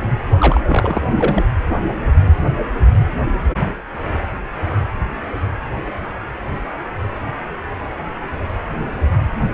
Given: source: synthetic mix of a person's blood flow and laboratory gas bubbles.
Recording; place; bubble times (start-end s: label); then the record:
Doppler ultrasound of blood flow; precordium
0.38-0.60 s: bubbles
0.68-1.02 s: bubbles
1.16-1.46 s: bubbles
From the record:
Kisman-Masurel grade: 212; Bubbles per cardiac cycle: several, 3 to 8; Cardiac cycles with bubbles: 1 to 10%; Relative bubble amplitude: moderate (0.250 to 0.450); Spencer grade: 1 (occasional bubble signal discernible with the cardiac motion signal, with majority of cardiac periods free of bubbles); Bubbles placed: anywhere in the cardiac cycle